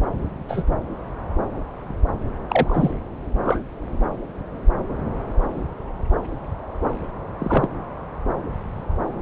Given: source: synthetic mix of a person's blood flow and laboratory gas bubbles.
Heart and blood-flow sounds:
Doppler ultrasound of blood flow; subclavian vein
0.48-0.63 s: bubbles
2.49-2.92 s: bubbles
3.44-3.60 s: bubbles
7.40-7.68 s: bubbles
From the record:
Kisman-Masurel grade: 122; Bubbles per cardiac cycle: 1 to 2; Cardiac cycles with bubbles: 10 to 50%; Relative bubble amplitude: moderate (0.250 to 0.450); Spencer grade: 2 (many but less than half of the cardiac periods contain bubble signals, singularly or in groups); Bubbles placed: anywhere in the cardiac cycle

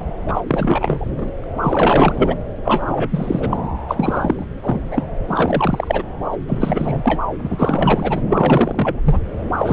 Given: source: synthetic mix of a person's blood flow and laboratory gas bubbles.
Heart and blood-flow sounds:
Doppler ultrasound of blood flow; subclavian vein
0.27-0.41 s: bubbles
0.47-1.12 s: bubbles
1.17-1.30 s: bubbles
1.62-2.34 s: bubbles
2.65-3.57 s: bubbles
3.88-4.45 s: bubbles
4.54-5.04 s: bubbles
5.28-6.03 s: bubbles
6.24-6.37 s: bubbles
6.47-7.21 s: bubbles
7.42-8.21 s: bubbles
8.29-8.99 s: bubbles
9.05-9.19 s: bubbles
9.57-9.73 s: bubbles
From the record:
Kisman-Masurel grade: 342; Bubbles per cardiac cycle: rolling drumbeat, 9 or more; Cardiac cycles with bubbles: 100%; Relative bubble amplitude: moderate (0.250 to 0.450); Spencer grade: 3 (all of the cardiac periods contain showers or single bubble signals, but not dominating or overriding the cardiac motion signals); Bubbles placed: anywhere in the cardiac cycle

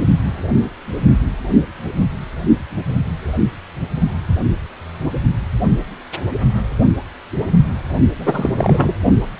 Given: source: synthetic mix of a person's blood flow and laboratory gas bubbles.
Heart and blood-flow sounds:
Doppler ultrasound of blood flow; precordium
8.17-8.96 s: bubbles
From the record:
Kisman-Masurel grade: 213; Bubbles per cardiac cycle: several, 3 to 8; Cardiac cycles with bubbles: 1 to 10%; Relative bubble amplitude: loud (0.450 to 0.775); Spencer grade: 1 (occasional bubble signal discernible with the cardiac motion signal, with majority of cardiac periods free of bubbles); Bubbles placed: only in the low amplitude regions of the cardiac cycle

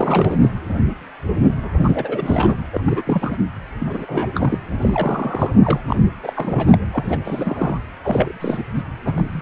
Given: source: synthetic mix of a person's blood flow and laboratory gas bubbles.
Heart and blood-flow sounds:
Doppler ultrasound of blood flow; precordium
0.00-0.37 s: bubbles
0.41-0.49 s: bubbles
1.76-2.56 s: bubbles
2.73-2.82 s: bubbles
2.85-3.02 s: bubbles
3.06-3.38 s: bubbles
3.79-4.31 s: bubbles
4.34-4.58 s: bubbles
4.80-5.50 s: bubbles
5.62-5.80 s: bubbles
5.88-5.96 s: bubbles
6.23-6.33 s: bubbles
6.36-6.86 s: bubbles
6.92-7.20 s: bubbles
7.25-7.78 s: bubbles
8.04-8.63 s: bubbles
8.76-8.82 s: bubbles
9.05-9.12 s: bubbles
9.15-9.42 s: bubbles
From the record:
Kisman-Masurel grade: 332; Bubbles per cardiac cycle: rolling drumbeat, 9 or more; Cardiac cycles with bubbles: 50 to 99%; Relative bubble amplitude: moderate (0.250 to 0.450); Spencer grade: 3 (all of the cardiac periods contain showers or single bubble signals, but not dominating or overriding the cardiac motion signals); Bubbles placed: anywhere in the cardiac cycle

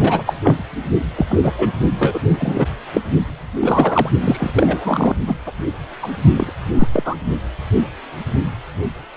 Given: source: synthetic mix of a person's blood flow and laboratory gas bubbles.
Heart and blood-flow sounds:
Doppler ultrasound of blood flow; precordium
0.00-0.23 s: bubbles
0.26-0.34 s: bubbles
0.43-0.64 s: bubbles
1.16-1.26 s: bubbles
1.28-1.39 s: bubbles
1.43-1.53 s: bubbles
1.58-1.69 s: bubbles
1.98-2.20 s: bubbles
2.29-2.66 s: bubbles
2.93-3.01 s: bubbles
3.60-4.09 s: bubbles
4.20-4.50 s: bubbles
4.54-5.15 s: bubbles
5.27-5.33 s: bubbles
5.46-5.51 s: bubbles
6.02-6.09 s: bubbles
6.37-6.52 s: bubbles
6.79-6.88 s: bubbles
6.92-7.15 s: bubbles
From the record:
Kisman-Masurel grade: 233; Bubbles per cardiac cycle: several, 3 to 8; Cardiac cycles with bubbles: 50 to 99%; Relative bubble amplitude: loud (0.450 to 0.775); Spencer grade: 3 (all of the cardiac periods contain showers or single bubble signals, but not dominating or overriding the cardiac motion signals); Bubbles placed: only in the low amplitude regions of the cardiac cycle

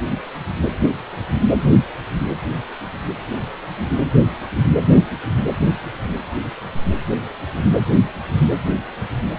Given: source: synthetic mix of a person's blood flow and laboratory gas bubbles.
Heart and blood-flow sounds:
Doppler ultrasound of blood flow; precordium
no bubbles
From the record:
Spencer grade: 0 (complete lack of bubble signals)

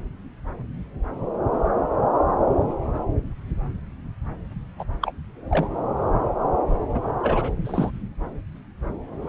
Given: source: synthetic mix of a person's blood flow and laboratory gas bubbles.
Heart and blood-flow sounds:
Doppler ultrasound of blood flow; subclavian vein
4.79-4.83 s: bubbles
5.02-5.12 s: bubbles
5.50-5.67 s: bubbles
6.94-6.99 s: bubbles
7.23-7.53 s: bubbles
7.65-7.90 s: bubbles
9.22-9.29 s: bubbles
From the record:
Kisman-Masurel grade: 221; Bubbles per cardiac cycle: several, 3 to 8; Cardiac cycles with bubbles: 10 to 50%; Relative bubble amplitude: barely perceptible (0.100 to 0.250); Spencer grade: 2 (many but less than half of the cardiac periods contain bubble signals, singularly or in groups); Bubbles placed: anywhere in the cardiac cycle

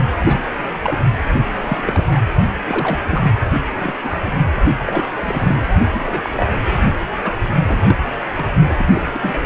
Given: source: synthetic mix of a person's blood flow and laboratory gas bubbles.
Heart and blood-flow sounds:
Doppler ultrasound of blood flow; precordium
0.17-0.49 s: bubbles
0.82-0.98 s: bubbles
1.33-1.40 s: bubbles
1.61-2.05 s: bubbles
2.07-2.21 s: bubbles
2.69-2.98 s: bubbles
3.08-3.32 s: bubbles
3.78-3.94 s: bubbles
4.03-4.10 s: bubbles
4.25-4.35 s: bubbles
4.87-5.04 s: bubbles
5.17-5.67 s: bubbles
5.91-6.01 s: bubbles
6.05-6.46 s: bubbles
7.24-7.33 s: bubbles
7.67-7.96 s: bubbles
8.36-8.47 s: bubbles
8.67-8.73 s: bubbles
8.79-9.02 s: bubbles
9.13-9.38 s: bubbles
From the record:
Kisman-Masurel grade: 232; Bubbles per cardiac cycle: several, 3 to 8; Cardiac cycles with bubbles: 50 to 99%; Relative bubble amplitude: moderate (0.250 to 0.450); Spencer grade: 3 (all of the cardiac periods contain showers or single bubble signals, but not dominating or overriding the cardiac motion signals); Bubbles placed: only in the low amplitude regions of the cardiac cycle

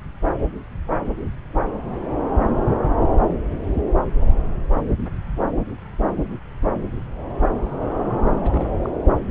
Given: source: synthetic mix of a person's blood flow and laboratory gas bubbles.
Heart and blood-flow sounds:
Doppler ultrasound of blood flow; subclavian vein
8.43-8.69 s: bubbles
8.83-8.90 s: bubbles
From the record:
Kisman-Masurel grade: 211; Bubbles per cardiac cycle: several, 3 to 8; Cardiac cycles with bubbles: 1 to 10%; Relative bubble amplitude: barely perceptible (0.100 to 0.250); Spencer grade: 1 (occasional bubble signal discernible with the cardiac motion signal, with majority of cardiac periods free of bubbles); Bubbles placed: anywhere in the cardiac cycle

